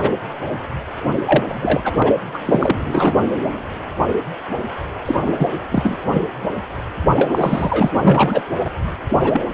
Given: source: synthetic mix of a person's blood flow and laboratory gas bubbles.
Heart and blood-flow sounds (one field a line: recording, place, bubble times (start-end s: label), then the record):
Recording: Doppler ultrasound of blood flow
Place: precordium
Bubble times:
0.00-0.11 s: bubbles
1.25-1.82 s: bubbles
1.84-1.94 s: bubbles
1.97-2.12 s: bubbles
2.33-2.38 s: bubbles
2.45-2.77 s: bubbles
2.85-3.21 s: bubbles
5.05-5.19 s: bubbles
5.25-5.47 s: bubbles
5.71-6.22 s: bubbles
7.16-7.92 s: bubbles
7.94-8.42 s: bubbles
8.65-8.71 s: bubbles
9.11-9.15 s: bubbles
9.24-9.46 s: bubbles
9.52-9.54 s: bubbles
From the record:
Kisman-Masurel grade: 332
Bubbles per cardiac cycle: rolling drumbeat, 9 or more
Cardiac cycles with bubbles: 50 to 99%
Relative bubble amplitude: moderate (0.250 to 0.450)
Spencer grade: 3 (all of the cardiac periods contain showers or single bubble signals, but not dominating or overriding the cardiac motion signals)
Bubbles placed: anywhere in the cardiac cycle